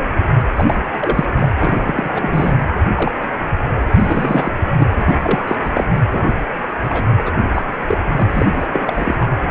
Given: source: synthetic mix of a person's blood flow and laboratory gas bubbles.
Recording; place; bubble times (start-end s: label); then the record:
Doppler ultrasound of blood flow; precordium
0.56-0.80 s: bubbles
1.01-1.26 s: bubbles
1.40-1.49 s: bubbles
1.57-2.57 s: bubbles
2.95-3.12 s: bubbles
3.21-3.29 s: bubbles
3.93-4.52 s: bubbles
4.79-4.86 s: bubbles
4.96-5.17 s: bubbles
5.22-5.56 s: bubbles
5.64-5.71 s: bubbles
5.74-5.84 s: bubbles
6.11-6.30 s: bubbles
6.83-7.03 s: bubbles
7.25-7.32 s: bubbles
7.54-7.62 s: bubbles
7.88-7.97 s: bubbles
8.16-8.28 s: bubbles
8.34-8.67 s: bubbles
8.72-8.81 s: bubbles
8.87-9.26 s: bubbles
From the record:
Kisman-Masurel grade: 232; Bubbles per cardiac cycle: several, 3 to 8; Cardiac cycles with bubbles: 50 to 99%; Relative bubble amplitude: moderate (0.250 to 0.450); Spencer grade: 3 (all of the cardiac periods contain showers or single bubble signals, but not dominating or overriding the cardiac motion signals); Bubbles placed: anywhere in the cardiac cycle